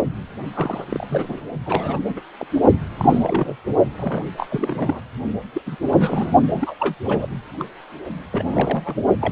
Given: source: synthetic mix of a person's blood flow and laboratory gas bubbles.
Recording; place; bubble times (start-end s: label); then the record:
Doppler ultrasound of blood flow; precordium
0.54-0.86 s: bubbles
0.91-1.06 s: bubbles
1.10-1.44 s: bubbles
1.66-2.00 s: bubbles
2.08-2.21 s: bubbles
2.39-2.47 s: bubbles
2.98-3.56 s: bubbles
3.98-4.30 s: bubbles
4.37-4.47 s: bubbles
4.50-5.00 s: bubbles
5.54-5.61 s: bubbles
5.66-5.76 s: bubbles
5.92-6.31 s: bubbles
6.47-6.75 s: bubbles
6.79-6.94 s: bubbles
7.04-7.28 s: bubbles
7.59-7.65 s: bubbles
8.32-8.95 s: bubbles
9.21-9.32 s: bubbles
From the record:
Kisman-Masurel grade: 342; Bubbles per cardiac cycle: rolling drumbeat, 9 or more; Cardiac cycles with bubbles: 100%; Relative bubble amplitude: moderate (0.250 to 0.450); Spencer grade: 3 (all of the cardiac periods contain showers or single bubble signals, but not dominating or overriding the cardiac motion signals); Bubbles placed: only in the low amplitude regions of the cardiac cycle